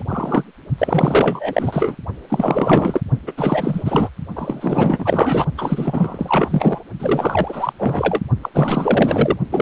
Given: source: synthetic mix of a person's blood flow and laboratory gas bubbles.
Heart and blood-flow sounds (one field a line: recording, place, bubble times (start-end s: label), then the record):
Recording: Doppler ultrasound of blood flow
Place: precordium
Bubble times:
0.00-0.02 s: bubbles
0.08-0.43 s: bubbles
0.78-1.97 s: bubbles
2.29-3.02 s: bubbles
3.27-3.33 s: bubbles
3.37-4.09 s: bubbles
4.35-5.45 s: bubbles
5.57-6.81 s: bubbles
6.99-7.73 s: bubbles
7.78-8.21 s: bubbles
8.42-8.49 s: bubbles
8.54-9.36 s: bubbles
9.50-9.62 s: bubbles
From the record:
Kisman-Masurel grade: 444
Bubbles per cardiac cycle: continuous sound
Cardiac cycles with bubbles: 100%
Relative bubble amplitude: maximal (0.775 to 0.999)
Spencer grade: 4 (maximum detectable bubble signal sounding continuously throughout systole and diastole of every cardiac period, and overriding the amplitude of the normal cardiac signals)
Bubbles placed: only in the low amplitude regions of the cardiac cycle